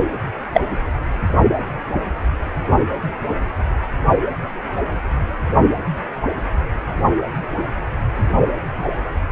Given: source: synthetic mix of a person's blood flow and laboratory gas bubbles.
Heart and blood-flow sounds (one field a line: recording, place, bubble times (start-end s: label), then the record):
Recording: Doppler ultrasound of blood flow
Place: precordium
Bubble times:
0.53-0.61 s: bubbles
From the record:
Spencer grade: 1 (occasional bubble signal discernible with the cardiac motion signal, with majority of cardiac periods free of bubbles)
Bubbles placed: anywhere in the cardiac cycle